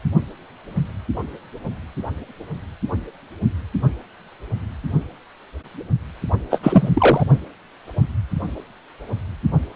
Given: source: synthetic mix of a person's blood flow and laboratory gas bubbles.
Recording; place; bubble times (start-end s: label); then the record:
Doppler ultrasound of blood flow; precordium
6.50-6.59 s: bubbles
6.62-6.89 s: bubbles
6.94-7.24 s: bubbles
From the record:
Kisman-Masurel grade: 213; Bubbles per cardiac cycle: several, 3 to 8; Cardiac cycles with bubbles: 1 to 10%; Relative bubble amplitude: loud (0.450 to 0.775); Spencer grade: 1 (occasional bubble signal discernible with the cardiac motion signal, with majority of cardiac periods free of bubbles); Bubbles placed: only in the low amplitude regions of the cardiac cycle